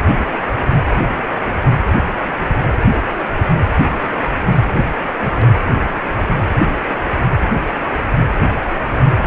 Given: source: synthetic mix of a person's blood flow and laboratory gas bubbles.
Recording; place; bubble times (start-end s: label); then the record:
Doppler ultrasound of blood flow; precordium
5.14-5.53 s: bubbles
9.17-9.27 s: bubbles
From the record:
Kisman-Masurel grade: 221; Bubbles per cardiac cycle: several, 3 to 8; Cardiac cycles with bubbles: 10 to 50%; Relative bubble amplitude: barely perceptible (0.100 to 0.250); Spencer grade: 2 (many but less than half of the cardiac periods contain bubble signals, singularly or in groups); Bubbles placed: anywhere in the cardiac cycle